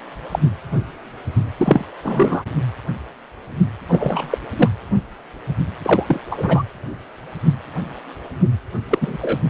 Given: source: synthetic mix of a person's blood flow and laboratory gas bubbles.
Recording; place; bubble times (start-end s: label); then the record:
Doppler ultrasound of blood flow; precordium
0.31-0.39 s: bubbles
1.58-1.85 s: bubbles
2.03-2.43 s: bubbles
3.89-4.38 s: bubbles
4.57-4.70 s: bubbles
5.83-6.20 s: bubbles
6.30-6.62 s: bubbles
8.90-8.98 s: bubbles
9.01-9.17 s: bubbles
9.21-9.39 s: bubbles
From the record:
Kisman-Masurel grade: 223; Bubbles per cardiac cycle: several, 3 to 8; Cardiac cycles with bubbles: 10 to 50%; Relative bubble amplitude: loud (0.450 to 0.775); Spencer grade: 2 (many but less than half of the cardiac periods contain bubble signals, singularly or in groups); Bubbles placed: anywhere in the cardiac cycle